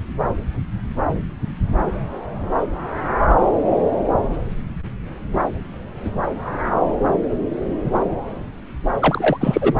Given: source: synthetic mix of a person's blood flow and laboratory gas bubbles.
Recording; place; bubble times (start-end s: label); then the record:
Doppler ultrasound of blood flow; subclavian vein
8.99-9.38 s: bubbles
9.40-9.75 s: bubbles
From the record:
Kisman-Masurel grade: 223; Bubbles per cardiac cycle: several, 3 to 8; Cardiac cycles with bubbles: 10 to 50%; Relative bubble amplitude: loud (0.450 to 0.775); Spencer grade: 2 (many but less than half of the cardiac periods contain bubble signals, singularly or in groups); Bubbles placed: anywhere in the cardiac cycle